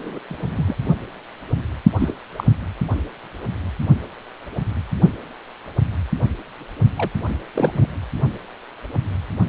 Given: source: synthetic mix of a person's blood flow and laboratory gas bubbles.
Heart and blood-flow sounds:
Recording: Doppler ultrasound of blood flow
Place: precordium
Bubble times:
0.00-0.19 s: bubbles
0.29-0.75 s: bubbles
1.99-2.12 s: bubbles
2.36-2.47 s: bubbles
6.97-7.10 s: bubbles
7.54-7.87 s: bubbles
From the record:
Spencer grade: 2 (many but less than half of the cardiac periods contain bubble signals, singularly or in groups)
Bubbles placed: only in the low amplitude regions of the cardiac cycle

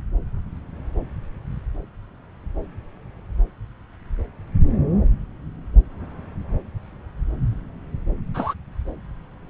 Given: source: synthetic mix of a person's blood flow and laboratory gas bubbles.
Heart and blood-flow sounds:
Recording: Doppler ultrasound of blood flow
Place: subclavian vein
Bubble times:
8.34-8.54 s: bubbles
From the record:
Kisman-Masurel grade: 112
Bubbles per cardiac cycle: 1 to 2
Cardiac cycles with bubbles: 1 to 10%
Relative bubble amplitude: moderate (0.250 to 0.450)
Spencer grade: 1 (occasional bubble signal discernible with the cardiac motion signal, with majority of cardiac periods free of bubbles)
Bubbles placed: anywhere in the cardiac cycle

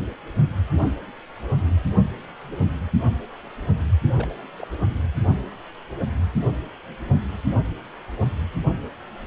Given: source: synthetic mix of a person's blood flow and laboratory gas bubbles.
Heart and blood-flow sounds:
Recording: Doppler ultrasound of blood flow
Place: precordium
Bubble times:
4.16-4.28 s: bubbles
4.58-4.67 s: bubbles
From the record:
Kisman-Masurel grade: 111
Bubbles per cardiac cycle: 1 to 2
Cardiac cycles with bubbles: 1 to 10%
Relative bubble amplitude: barely perceptible (0.100 to 0.250)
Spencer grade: 1 (occasional bubble signal discernible with the cardiac motion signal, with majority of cardiac periods free of bubbles)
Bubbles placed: anywhere in the cardiac cycle

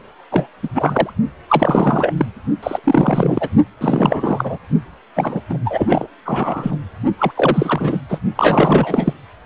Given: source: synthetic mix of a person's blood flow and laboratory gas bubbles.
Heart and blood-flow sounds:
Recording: Doppler ultrasound of blood flow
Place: precordium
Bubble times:
0.31-0.47 s: bubbles
0.62-0.69 s: bubbles
0.74-1.13 s: bubbles
1.49-2.13 s: bubbles
2.17-2.25 s: bubbles
2.62-2.80 s: bubbles
2.84-3.48 s: bubbles
3.80-4.58 s: bubbles
5.16-5.41 s: bubbles
5.49-5.57 s: bubbles
5.65-6.08 s: bubbles
6.26-6.78 s: bubbles
7.19-7.32 s: bubbles
7.36-8.00 s: bubbles
8.09-8.19 s: bubbles
8.36-9.13 s: bubbles
From the record:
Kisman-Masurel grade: 343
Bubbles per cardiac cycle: rolling drumbeat, 9 or more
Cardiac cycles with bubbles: 100%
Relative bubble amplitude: loud (0.450 to 0.775)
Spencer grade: 3 (all of the cardiac periods contain showers or single bubble signals, but not dominating or overriding the cardiac motion signals)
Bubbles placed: only in the low amplitude regions of the cardiac cycle

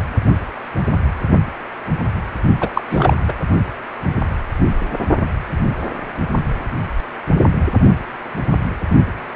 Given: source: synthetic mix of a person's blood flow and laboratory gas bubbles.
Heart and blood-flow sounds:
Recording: Doppler ultrasound of blood flow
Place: precordium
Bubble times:
2.60-2.69 s: bubbles
2.73-2.81 s: bubbles
2.87-3.23 s: bubbles
3.28-3.34 s: bubbles
From the record:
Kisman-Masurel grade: 213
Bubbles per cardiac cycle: several, 3 to 8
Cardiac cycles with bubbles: 1 to 10%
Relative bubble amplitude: loud (0.450 to 0.775)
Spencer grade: 1 (occasional bubble signal discernible with the cardiac motion signal, with majority of cardiac periods free of bubbles)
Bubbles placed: only in the low amplitude regions of the cardiac cycle

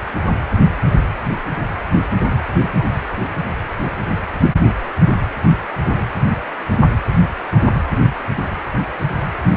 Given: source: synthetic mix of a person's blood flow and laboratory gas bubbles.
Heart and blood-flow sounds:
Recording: Doppler ultrasound of blood flow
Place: precordium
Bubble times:
no bubbles
From the record:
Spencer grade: 0 (complete lack of bubble signals)

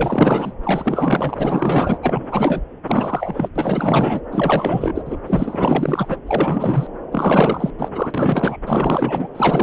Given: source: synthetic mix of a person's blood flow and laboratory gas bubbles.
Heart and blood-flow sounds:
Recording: Doppler ultrasound of blood flow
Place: subclavian vein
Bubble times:
0.00-0.52 s: bubbles
0.63-1.99 s: bubbles
2.02-2.60 s: bubbles
2.87-3.49 s: bubbles
3.56-4.21 s: bubbles
4.31-5.17 s: bubbles
5.26-6.17 s: bubbles
6.27-6.88 s: bubbles
7.11-7.71 s: bubbles
7.77-7.88 s: bubbles
7.95-8.12 s: bubbles
8.14-8.56 s: bubbles
8.66-9.28 s: bubbles
9.34-9.62 s: bubbles
From the record:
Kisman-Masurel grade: 444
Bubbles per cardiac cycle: continuous sound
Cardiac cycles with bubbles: 100%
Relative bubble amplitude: maximal (0.775 to 0.999)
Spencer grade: 4 (maximum detectable bubble signal sounding continuously throughout systole and diastole of every cardiac period, and overriding the amplitude of the normal cardiac signals)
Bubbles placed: anywhere in the cardiac cycle

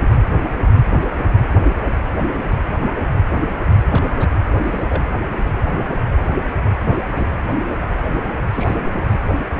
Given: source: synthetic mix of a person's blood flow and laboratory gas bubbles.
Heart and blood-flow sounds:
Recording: Doppler ultrasound of blood flow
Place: precordium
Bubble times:
3.92-4.08 s: bubbles
4.20-4.28 s: bubbles
4.63-4.83 s: bubbles
4.89-5.04 s: bubbles
6.88-7.27 s: bubbles
8.53-9.06 s: bubbles
From the record:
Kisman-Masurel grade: 221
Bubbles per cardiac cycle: several, 3 to 8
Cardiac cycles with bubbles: 10 to 50%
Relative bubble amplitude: barely perceptible (0.100 to 0.250)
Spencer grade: 2 (many but less than half of the cardiac periods contain bubble signals, singularly or in groups)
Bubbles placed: anywhere in the cardiac cycle

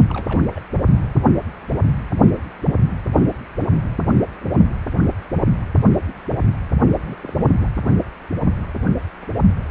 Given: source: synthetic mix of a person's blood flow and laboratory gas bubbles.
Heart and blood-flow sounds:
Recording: Doppler ultrasound of blood flow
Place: precordium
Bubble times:
0.09-0.40 s: bubbles
0.46-0.60 s: bubbles
7.00-7.15 s: bubbles
7.23-7.35 s: bubbles
7.60-7.68 s: bubbles
From the record:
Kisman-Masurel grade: 221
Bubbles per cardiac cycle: several, 3 to 8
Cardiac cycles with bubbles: 10 to 50%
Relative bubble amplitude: barely perceptible (0.100 to 0.250)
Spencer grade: 2 (many but less than half of the cardiac periods contain bubble signals, singularly or in groups)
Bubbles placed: anywhere in the cardiac cycle

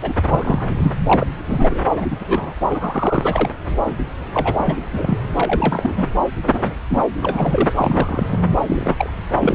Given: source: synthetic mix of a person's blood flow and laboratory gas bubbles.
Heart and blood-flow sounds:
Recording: Doppler ultrasound of blood flow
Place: subclavian vein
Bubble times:
0.01-0.13 s: bubbles
0.31-0.92 s: bubbles
1.06-1.27 s: bubbles
1.34-1.81 s: bubbles
1.91-2.54 s: bubbles
2.69-3.49 s: bubbles
3.85-3.97 s: bubbles
4.33-4.83 s: bubbles
4.92-5.18 s: bubbles
5.36-6.07 s: bubbles
6.23-6.28 s: bubbles
6.43-6.73 s: bubbles
6.90-7.03 s: bubbles
7.20-7.72 s: bubbles
7.77-8.39 s: bubbles
8.68-8.96 s: bubbles
8.98-9.10 s: bubbles
9.40-9.55 s: bubbles
From the record:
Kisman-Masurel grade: 242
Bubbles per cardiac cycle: several, 3 to 8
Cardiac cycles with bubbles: 100%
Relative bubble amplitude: moderate (0.250 to 0.450)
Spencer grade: 3 (all of the cardiac periods contain showers or single bubble signals, but not dominating or overriding the cardiac motion signals)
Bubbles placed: anywhere in the cardiac cycle

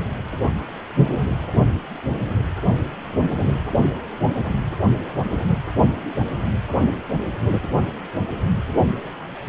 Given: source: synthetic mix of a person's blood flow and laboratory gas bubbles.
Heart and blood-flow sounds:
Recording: Doppler ultrasound of blood flow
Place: precordium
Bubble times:
0.96-1.26 s: bubbles
From the record:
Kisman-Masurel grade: 112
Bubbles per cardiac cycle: 1 to 2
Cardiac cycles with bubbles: 1 to 10%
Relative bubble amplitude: moderate (0.250 to 0.450)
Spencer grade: 1 (occasional bubble signal discernible with the cardiac motion signal, with majority of cardiac periods free of bubbles)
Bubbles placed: anywhere in the cardiac cycle

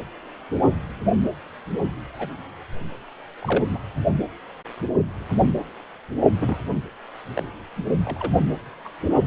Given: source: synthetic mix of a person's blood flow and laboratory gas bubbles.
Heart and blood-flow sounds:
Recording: Doppler ultrasound of blood flow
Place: precordium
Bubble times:
2.18-2.28 s: bubbles
3.42-3.67 s: bubbles
3.69-3.79 s: bubbles
6.42-6.56 s: bubbles
7.34-7.42 s: bubbles
8.04-8.41 s: bubbles
8.85-8.88 s: bubbles
From the record:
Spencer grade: 2 (many but less than half of the cardiac periods contain bubble signals, singularly or in groups)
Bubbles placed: anywhere in the cardiac cycle

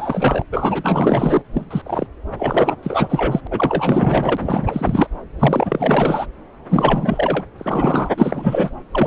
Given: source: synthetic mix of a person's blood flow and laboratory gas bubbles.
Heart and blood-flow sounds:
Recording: Doppler ultrasound of blood flow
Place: subclavian vein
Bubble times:
0.00-0.44 s: bubbles
0.52-1.42 s: bubbles
1.53-1.81 s: bubbles
1.86-2.07 s: bubbles
2.39-2.75 s: bubbles
2.83-3.41 s: bubbles
3.45-3.48 s: bubbles
3.50-5.07 s: bubbles
5.38-6.26 s: bubbles
6.69-7.45 s: bubbles
7.58-8.10 s: bubbles
8.12-8.71 s: bubbles
8.91-9.07 s: bubbles
From the record:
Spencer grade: 4 (maximum detectable bubble signal sounding continuously throughout systole and diastole of every cardiac period, and overriding the amplitude of the normal cardiac signals)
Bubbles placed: anywhere in the cardiac cycle

